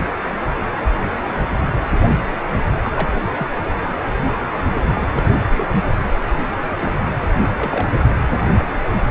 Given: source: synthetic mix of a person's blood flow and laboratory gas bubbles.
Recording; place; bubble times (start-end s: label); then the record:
Doppler ultrasound of blood flow; precordium
2.83-2.90 s: bubbles
2.96-3.09 s: bubbles
3.38-3.47 s: bubbles
4.26-4.33 s: bubbles
4.54-4.62 s: bubbles
4.94-5.01 s: bubbles
5.17-5.22 s: bubbles
5.57-5.67 s: bubbles
6.80-6.97 s: bubbles
7.56-7.88 s: bubbles
From the record:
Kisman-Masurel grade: 121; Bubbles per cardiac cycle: 1 to 2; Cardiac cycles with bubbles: 10 to 50%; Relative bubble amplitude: barely perceptible (0.100 to 0.250); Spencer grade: 2 (many but less than half of the cardiac periods contain bubble signals, singularly or in groups); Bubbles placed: anywhere in the cardiac cycle